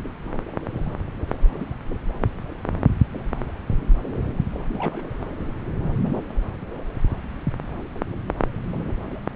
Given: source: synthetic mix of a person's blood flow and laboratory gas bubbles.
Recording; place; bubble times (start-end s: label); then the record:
Doppler ultrasound of blood flow; subclavian vein
4.73-5.08 s: bubbles
From the record:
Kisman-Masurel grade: 211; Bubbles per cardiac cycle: several, 3 to 8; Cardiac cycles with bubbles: 1 to 10%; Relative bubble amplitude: barely perceptible (0.100 to 0.250); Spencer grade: 1 (occasional bubble signal discernible with the cardiac motion signal, with majority of cardiac periods free of bubbles); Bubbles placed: anywhere in the cardiac cycle